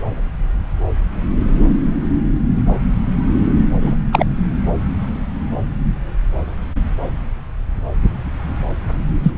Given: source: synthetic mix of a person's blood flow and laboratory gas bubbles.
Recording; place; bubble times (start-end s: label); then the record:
Doppler ultrasound of blood flow; subclavian vein
3.81-3.95 s: bubbles
4.12-4.25 s: bubbles
9.23-9.32 s: bubbles
From the record:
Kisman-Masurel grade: 123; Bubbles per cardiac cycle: 1 to 2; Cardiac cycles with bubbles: 10 to 50%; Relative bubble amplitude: loud (0.450 to 0.775); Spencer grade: 2 (many but less than half of the cardiac periods contain bubble signals, singularly or in groups); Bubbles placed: anywhere in the cardiac cycle